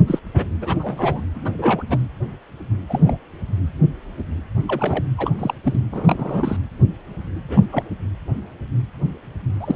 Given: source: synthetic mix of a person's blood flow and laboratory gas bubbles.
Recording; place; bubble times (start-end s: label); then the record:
Doppler ultrasound of blood flow; precordium
0.07-0.19 s: bubbles
0.34-0.46 s: bubbles
0.60-1.22 s: bubbles
1.34-1.83 s: bubbles
1.89-2.02 s: bubbles
2.89-3.17 s: bubbles
4.67-5.04 s: bubbles
5.17-5.31 s: bubbles
5.38-5.54 s: bubbles
5.64-5.79 s: bubbles
5.92-6.57 s: bubbles
7.43-7.65 s: bubbles
7.71-7.83 s: bubbles
9.60-9.76 s: bubbles
From the record:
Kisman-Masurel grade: 232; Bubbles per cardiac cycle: several, 3 to 8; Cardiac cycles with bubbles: 50 to 99%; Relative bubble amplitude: moderate (0.250 to 0.450); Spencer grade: 3 (all of the cardiac periods contain showers or single bubble signals, but not dominating or overriding the cardiac motion signals); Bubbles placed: anywhere in the cardiac cycle